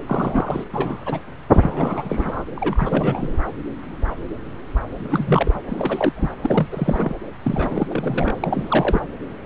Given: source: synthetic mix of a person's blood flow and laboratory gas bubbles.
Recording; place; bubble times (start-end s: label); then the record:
Doppler ultrasound of blood flow; subclavian vein
0.00-0.65 s: bubbles
0.73-1.01 s: bubbles
1.06-1.21 s: bubbles
1.52-2.43 s: bubbles
2.56-3.37 s: bubbles
4.93-5.59 s: bubbles
5.67-6.12 s: bubbles
6.17-6.31 s: bubbles
6.42-7.14 s: bubbles
7.42-7.87 s: bubbles
7.90-8.33 s: bubbles
8.40-9.01 s: bubbles
From the record:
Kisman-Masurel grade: 332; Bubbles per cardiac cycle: rolling drumbeat, 9 or more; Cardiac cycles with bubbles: 50 to 99%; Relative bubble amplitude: moderate (0.250 to 0.450); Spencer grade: 3 (all of the cardiac periods contain showers or single bubble signals, but not dominating or overriding the cardiac motion signals); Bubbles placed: anywhere in the cardiac cycle